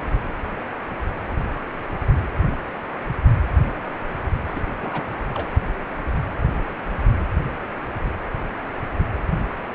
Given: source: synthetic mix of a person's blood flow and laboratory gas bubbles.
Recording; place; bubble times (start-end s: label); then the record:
Doppler ultrasound of blood flow; precordium
4.55-4.61 s: bubbles
4.82-5.04 s: bubbles
5.34-5.49 s: bubbles
From the record:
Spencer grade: 1 (occasional bubble signal discernible with the cardiac motion signal, with majority of cardiac periods free of bubbles); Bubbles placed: anywhere in the cardiac cycle